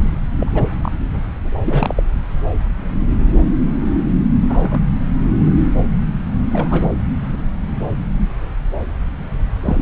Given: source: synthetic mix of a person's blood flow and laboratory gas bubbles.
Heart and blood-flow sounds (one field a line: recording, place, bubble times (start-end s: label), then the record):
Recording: Doppler ultrasound of blood flow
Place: subclavian vein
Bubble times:
0.40-0.63 s: bubbles
0.82-0.92 s: bubbles
1.64-2.03 s: bubbles
4.50-4.80 s: bubbles
6.51-6.93 s: bubbles
9.64-9.82 s: bubbles
From the record:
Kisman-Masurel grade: 222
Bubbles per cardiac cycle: several, 3 to 8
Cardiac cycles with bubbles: 10 to 50%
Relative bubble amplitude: moderate (0.250 to 0.450)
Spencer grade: 2 (many but less than half of the cardiac periods contain bubble signals, singularly or in groups)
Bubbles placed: anywhere in the cardiac cycle